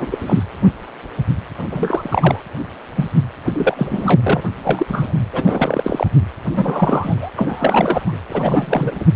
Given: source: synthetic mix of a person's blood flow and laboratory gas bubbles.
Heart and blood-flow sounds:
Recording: Doppler ultrasound of blood flow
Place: precordium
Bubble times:
0.00-0.43 s: bubbles
1.70-2.41 s: bubbles
2.95-3.08 s: bubbles
3.46-4.42 s: bubbles
4.64-5.27 s: bubbles
5.33-6.12 s: bubbles
6.49-7.32 s: bubbles
7.36-8.18 s: bubbles
8.27-9.06 s: bubbles
From the record:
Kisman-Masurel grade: 333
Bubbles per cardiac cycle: rolling drumbeat, 9 or more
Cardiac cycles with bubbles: 50 to 99%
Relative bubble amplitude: loud (0.450 to 0.775)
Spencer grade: 3 (all of the cardiac periods contain showers or single bubble signals, but not dominating or overriding the cardiac motion signals)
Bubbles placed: anywhere in the cardiac cycle

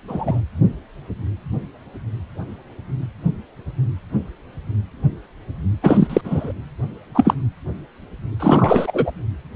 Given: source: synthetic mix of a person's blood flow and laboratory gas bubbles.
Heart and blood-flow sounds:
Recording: Doppler ultrasound of blood flow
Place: precordium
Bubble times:
0.07-0.40 s: bubbles
5.81-6.21 s: bubbles
6.24-6.53 s: bubbles
7.14-7.34 s: bubbles
8.39-9.12 s: bubbles
From the record:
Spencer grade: 2 (many but less than half of the cardiac periods contain bubble signals, singularly or in groups)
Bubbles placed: anywhere in the cardiac cycle

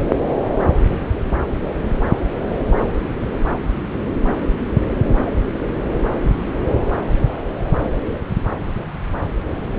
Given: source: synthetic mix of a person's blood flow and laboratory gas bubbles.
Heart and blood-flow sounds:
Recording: Doppler ultrasound of blood flow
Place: subclavian vein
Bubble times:
no bubbles
From the record:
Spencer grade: 0 (complete lack of bubble signals)

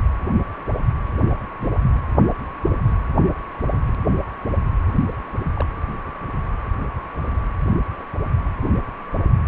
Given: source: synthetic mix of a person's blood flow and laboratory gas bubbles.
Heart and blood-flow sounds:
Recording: Doppler ultrasound of blood flow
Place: precordium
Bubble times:
1.58-1.71 s: bubbles
5.57-5.65 s: bubbles
From the record:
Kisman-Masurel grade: 121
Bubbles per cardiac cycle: 1 to 2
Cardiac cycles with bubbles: 10 to 50%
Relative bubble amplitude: barely perceptible (0.100 to 0.250)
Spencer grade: 2 (many but less than half of the cardiac periods contain bubble signals, singularly or in groups)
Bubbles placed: anywhere in the cardiac cycle

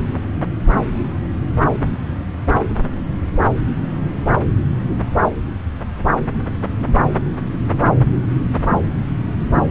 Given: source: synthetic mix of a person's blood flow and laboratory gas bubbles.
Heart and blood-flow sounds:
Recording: Doppler ultrasound of blood flow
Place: subclavian vein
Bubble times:
no bubbles
From the record:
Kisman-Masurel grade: 000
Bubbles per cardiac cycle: 0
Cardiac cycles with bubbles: 0%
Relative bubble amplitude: no bubbles discernible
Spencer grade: 0 (complete lack of bubble signals)

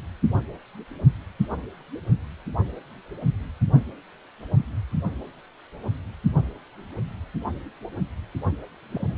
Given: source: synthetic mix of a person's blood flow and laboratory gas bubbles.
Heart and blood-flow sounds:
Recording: Doppler ultrasound of blood flow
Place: precordium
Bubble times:
8.92-9.18 s: bubbles
From the record:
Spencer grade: 1 (occasional bubble signal discernible with the cardiac motion signal, with majority of cardiac periods free of bubbles)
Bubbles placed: only in the low amplitude regions of the cardiac cycle

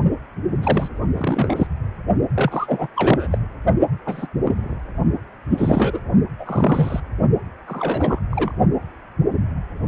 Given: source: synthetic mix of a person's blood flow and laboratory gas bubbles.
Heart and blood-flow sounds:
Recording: Doppler ultrasound of blood flow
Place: precordium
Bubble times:
0.62-0.89 s: bubbles
1.14-1.67 s: bubbles
2.35-2.88 s: bubbles
2.96-3.27 s: bubbles
3.30-3.38 s: bubbles
4.06-4.27 s: bubbles
4.44-4.76 s: bubbles
5.50-6.00 s: bubbles
6.38-7.00 s: bubbles
7.67-8.19 s: bubbles
8.31-8.51 s: bubbles
From the record:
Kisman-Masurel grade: 232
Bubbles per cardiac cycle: several, 3 to 8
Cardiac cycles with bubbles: 50 to 99%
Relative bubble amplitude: moderate (0.250 to 0.450)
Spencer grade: 3 (all of the cardiac periods contain showers or single bubble signals, but not dominating or overriding the cardiac motion signals)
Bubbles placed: only in the low amplitude regions of the cardiac cycle

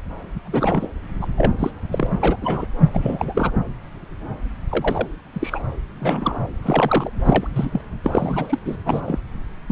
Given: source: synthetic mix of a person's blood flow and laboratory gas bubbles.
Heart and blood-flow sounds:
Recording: Doppler ultrasound of blood flow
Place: subclavian vein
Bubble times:
0.45-0.88 s: bubbles
1.21-1.26 s: bubbles
1.38-1.51 s: bubbles
1.58-1.70 s: bubbles
1.92-2.09 s: bubbles
2.21-2.66 s: bubbles
2.92-3.51 s: bubbles
4.70-5.08 s: bubbles
5.33-5.62 s: bubbles
6.00-6.38 s: bubbles
6.62-7.10 s: bubbles
7.24-7.47 s: bubbles
7.54-7.70 s: bubbles
7.72-7.81 s: bubbles
8.04-8.59 s: bubbles
8.64-8.77 s: bubbles
8.85-9.20 s: bubbles
9.66-9.72 s: bubbles
From the record:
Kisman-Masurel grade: 232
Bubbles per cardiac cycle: several, 3 to 8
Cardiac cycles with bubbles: 50 to 99%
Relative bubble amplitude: moderate (0.250 to 0.450)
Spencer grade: 3 (all of the cardiac periods contain showers or single bubble signals, but not dominating or overriding the cardiac motion signals)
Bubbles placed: anywhere in the cardiac cycle

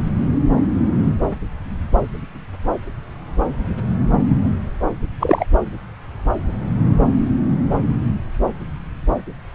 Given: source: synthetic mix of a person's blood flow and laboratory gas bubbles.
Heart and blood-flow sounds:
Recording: Doppler ultrasound of blood flow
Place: subclavian vein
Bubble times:
5.20-5.45 s: bubbles
From the record:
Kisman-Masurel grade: 113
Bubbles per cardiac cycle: 1 to 2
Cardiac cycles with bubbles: 1 to 10%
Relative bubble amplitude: loud (0.450 to 0.775)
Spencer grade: 1 (occasional bubble signal discernible with the cardiac motion signal, with majority of cardiac periods free of bubbles)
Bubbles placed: anywhere in the cardiac cycle

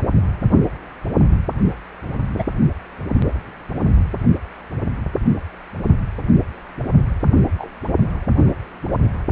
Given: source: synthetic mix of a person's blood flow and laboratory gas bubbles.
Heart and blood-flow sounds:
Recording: Doppler ultrasound of blood flow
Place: precordium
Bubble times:
2.36-2.44 s: bubbles
7.58-7.69 s: bubbles
8.40-8.54 s: bubbles
From the record:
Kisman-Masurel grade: 121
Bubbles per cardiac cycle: 1 to 2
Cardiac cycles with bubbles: 10 to 50%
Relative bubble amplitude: barely perceptible (0.100 to 0.250)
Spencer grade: 2 (many but less than half of the cardiac periods contain bubble signals, singularly or in groups)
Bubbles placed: only in the low amplitude regions of the cardiac cycle

